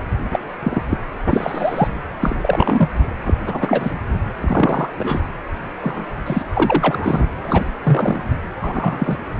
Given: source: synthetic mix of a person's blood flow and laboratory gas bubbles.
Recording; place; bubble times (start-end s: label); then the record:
Doppler ultrasound of blood flow; precordium
0.32-0.39 s: bubbles
0.62-0.83 s: bubbles
0.89-0.97 s: bubbles
1.29-1.88 s: bubbles
2.19-2.35 s: bubbles
2.41-2.94 s: bubbles
3.25-3.34 s: bubbles
3.46-3.91 s: bubbles
4.41-4.89 s: bubbles
4.98-5.27 s: bubbles
5.81-6.08 s: bubbles
6.26-6.43 s: bubbles
6.54-7.27 s: bubbles
7.43-7.65 s: bubbles
7.83-8.29 s: bubbles
8.60-9.17 s: bubbles
From the record:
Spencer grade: 3 (all of the cardiac periods contain showers or single bubble signals, but not dominating or overriding the cardiac motion signals); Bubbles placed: anywhere in the cardiac cycle